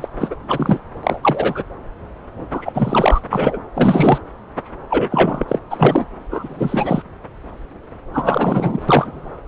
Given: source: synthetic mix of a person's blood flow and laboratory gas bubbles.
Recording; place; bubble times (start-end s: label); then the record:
Doppler ultrasound of blood flow; subclavian vein
0.00-0.08 s: bubbles
0.19-0.35 s: bubbles
0.48-0.80 s: bubbles
1.03-1.20 s: bubbles
1.23-1.63 s: bubbles
2.50-3.20 s: bubbles
3.24-3.26 s: bubbles
3.29-3.60 s: bubbles
3.75-4.19 s: bubbles
4.90-5.45 s: bubbles
5.48-5.59 s: bubbles
5.70-6.07 s: bubbles
6.30-7.02 s: bubbles
8.13-8.80 s: bubbles
8.88-9.39 s: bubbles
From the record:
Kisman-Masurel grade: 233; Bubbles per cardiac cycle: several, 3 to 8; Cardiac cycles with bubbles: 50 to 99%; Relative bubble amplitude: loud (0.450 to 0.775); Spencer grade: 3 (all of the cardiac periods contain showers or single bubble signals, but not dominating or overriding the cardiac motion signals); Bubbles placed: anywhere in the cardiac cycle